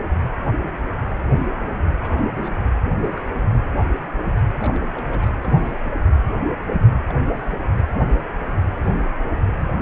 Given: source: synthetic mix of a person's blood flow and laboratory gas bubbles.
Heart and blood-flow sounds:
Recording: Doppler ultrasound of blood flow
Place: precordium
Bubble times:
1.23-1.27 s: bubbles
1.61-1.79 s: bubbles
1.99-2.25 s: bubbles
2.41-2.52 s: bubbles
2.90-3.26 s: bubbles
4.58-4.84 s: bubbles
4.93-5.33 s: bubbles
5.42-5.58 s: bubbles
5.60-5.71 s: bubbles
5.84-5.95 s: bubbles
7.03-7.14 s: bubbles
7.41-7.45 s: bubbles
7.49-7.55 s: bubbles
7.62-7.84 s: bubbles
9.57-9.71 s: bubbles
From the record:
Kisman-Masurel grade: 221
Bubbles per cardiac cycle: several, 3 to 8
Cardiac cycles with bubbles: 10 to 50%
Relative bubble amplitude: barely perceptible (0.100 to 0.250)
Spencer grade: 2 (many but less than half of the cardiac periods contain bubble signals, singularly or in groups)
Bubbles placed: anywhere in the cardiac cycle

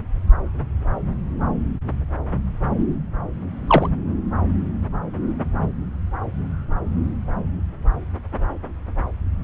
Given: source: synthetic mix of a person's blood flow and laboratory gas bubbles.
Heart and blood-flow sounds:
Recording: Doppler ultrasound of blood flow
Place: subclavian vein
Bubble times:
3.67-3.89 s: bubbles
From the record:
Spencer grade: 2 (many but less than half of the cardiac periods contain bubble signals, singularly or in groups)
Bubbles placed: anywhere in the cardiac cycle

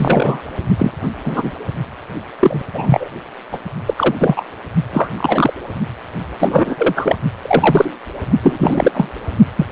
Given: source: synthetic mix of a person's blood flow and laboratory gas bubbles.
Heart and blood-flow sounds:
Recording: Doppler ultrasound of blood flow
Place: precordium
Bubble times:
0.00-0.42 s: bubbles
0.78-0.92 s: bubbles
1.26-1.52 s: bubbles
2.40-2.62 s: bubbles
2.73-3.08 s: bubbles
3.52-3.58 s: bubbles
3.87-3.94 s: bubbles
3.97-4.15 s: bubbles
4.19-4.44 s: bubbles
4.92-5.09 s: bubbles
5.17-5.53 s: bubbles
6.40-7.16 s: bubbles
7.42-7.91 s: bubbles
8.42-9.09 s: bubbles
9.56-9.65 s: bubbles
From the record:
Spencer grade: 3 (all of the cardiac periods contain showers or single bubble signals, but not dominating or overriding the cardiac motion signals)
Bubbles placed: only in the low amplitude regions of the cardiac cycle

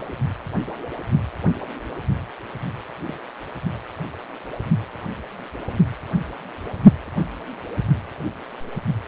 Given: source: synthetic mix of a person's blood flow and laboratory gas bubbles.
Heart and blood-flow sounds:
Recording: Doppler ultrasound of blood flow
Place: precordium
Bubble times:
3.06-3.18 s: bubbles
From the record:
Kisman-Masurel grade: 111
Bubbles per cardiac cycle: 1 to 2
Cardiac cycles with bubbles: 1 to 10%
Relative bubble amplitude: barely perceptible (0.100 to 0.250)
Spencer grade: 1 (occasional bubble signal discernible with the cardiac motion signal, with majority of cardiac periods free of bubbles)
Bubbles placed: anywhere in the cardiac cycle

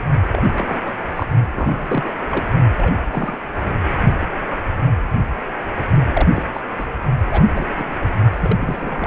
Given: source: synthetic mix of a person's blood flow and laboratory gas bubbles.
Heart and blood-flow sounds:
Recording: Doppler ultrasound of blood flow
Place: precordium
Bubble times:
0.33-0.99 s: bubbles
1.16-1.26 s: bubbles
1.55-2.12 s: bubbles
2.30-2.46 s: bubbles
2.77-2.95 s: bubbles
3.10-3.38 s: bubbles
3.60-3.71 s: bubbles
6.13-6.42 s: bubbles
6.53-6.61 s: bubbles
6.79-6.86 s: bubbles
7.31-7.46 s: bubbles
7.53-7.65 s: bubbles
7.77-7.85 s: bubbles
8.01-8.06 s: bubbles
8.31-8.56 s: bubbles
8.60-9.07 s: bubbles
From the record:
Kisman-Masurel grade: 232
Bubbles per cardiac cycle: several, 3 to 8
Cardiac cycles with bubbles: 50 to 99%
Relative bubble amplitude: moderate (0.250 to 0.450)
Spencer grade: 3 (all of the cardiac periods contain showers or single bubble signals, but not dominating or overriding the cardiac motion signals)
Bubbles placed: only in the low amplitude regions of the cardiac cycle

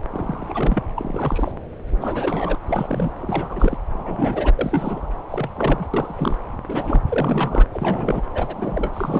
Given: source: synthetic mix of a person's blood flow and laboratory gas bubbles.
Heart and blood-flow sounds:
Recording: Doppler ultrasound of blood flow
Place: subclavian vein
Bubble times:
0.12-0.83 s: bubbles
0.96-1.52 s: bubbles
1.90-2.56 s: bubbles
2.64-3.12 s: bubbles
3.21-3.78 s: bubbles
3.93-4.53 s: bubbles
4.58-5.07 s: bubbles
5.29-5.50 s: bubbles
5.57-5.85 s: bubbles
5.93-6.38 s: bubbles
6.68-7.02 s: bubbles
7.08-7.66 s: bubbles
7.73-8.21 s: bubbles
8.33-8.90 s: bubbles
8.93-9.20 s: bubbles
From the record:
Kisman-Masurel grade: 342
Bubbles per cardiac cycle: rolling drumbeat, 9 or more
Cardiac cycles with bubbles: 100%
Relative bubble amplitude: moderate (0.250 to 0.450)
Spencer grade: 3 (all of the cardiac periods contain showers or single bubble signals, but not dominating or overriding the cardiac motion signals)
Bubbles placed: anywhere in the cardiac cycle

